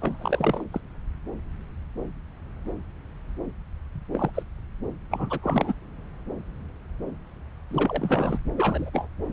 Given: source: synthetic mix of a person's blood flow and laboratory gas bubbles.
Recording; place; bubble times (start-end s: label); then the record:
Doppler ultrasound of blood flow; subclavian vein
0.02-0.64 s: bubbles
0.72-0.80 s: bubbles
4.13-4.30 s: bubbles
4.34-4.42 s: bubbles
5.11-5.39 s: bubbles
5.42-5.74 s: bubbles
7.71-8.38 s: bubbles
8.56-8.89 s: bubbles
8.93-9.07 s: bubbles
From the record:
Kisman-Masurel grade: 221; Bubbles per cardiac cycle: several, 3 to 8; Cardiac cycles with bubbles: 10 to 50%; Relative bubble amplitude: barely perceptible (0.100 to 0.250); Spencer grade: 2 (many but less than half of the cardiac periods contain bubble signals, singularly or in groups); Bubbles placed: anywhere in the cardiac cycle